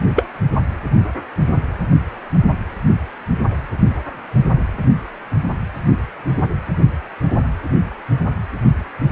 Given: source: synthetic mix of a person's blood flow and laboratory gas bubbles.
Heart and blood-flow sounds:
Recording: Doppler ultrasound of blood flow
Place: precordium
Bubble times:
0.16-0.26 s: bubbles
From the record:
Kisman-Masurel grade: 123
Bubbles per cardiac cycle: 1 to 2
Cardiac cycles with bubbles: 10 to 50%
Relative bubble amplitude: loud (0.450 to 0.775)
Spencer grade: 2 (many but less than half of the cardiac periods contain bubble signals, singularly or in groups)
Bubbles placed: anywhere in the cardiac cycle

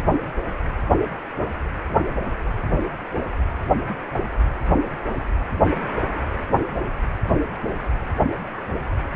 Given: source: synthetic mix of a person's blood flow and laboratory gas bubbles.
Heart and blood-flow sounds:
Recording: Doppler ultrasound of blood flow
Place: precordium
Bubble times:
no bubbles
From the record:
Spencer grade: 0 (complete lack of bubble signals)

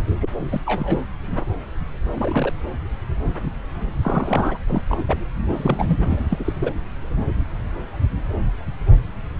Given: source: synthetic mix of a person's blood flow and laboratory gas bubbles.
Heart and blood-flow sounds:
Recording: Doppler ultrasound of blood flow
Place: subclavian vein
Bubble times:
0.20-0.29 s: bubbles
0.38-0.60 s: bubbles
0.65-1.05 s: bubbles
2.15-2.53 s: bubbles
4.02-4.58 s: bubbles
4.67-4.83 s: bubbles
4.89-5.04 s: bubbles
5.08-5.24 s: bubbles
5.50-5.99 s: bubbles
6.09-6.26 s: bubbles
6.30-6.53 s: bubbles
6.61-6.72 s: bubbles
From the record:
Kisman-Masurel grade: 232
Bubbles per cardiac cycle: several, 3 to 8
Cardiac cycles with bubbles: 50 to 99%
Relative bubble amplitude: moderate (0.250 to 0.450)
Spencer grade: 3 (all of the cardiac periods contain showers or single bubble signals, but not dominating or overriding the cardiac motion signals)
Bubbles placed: anywhere in the cardiac cycle

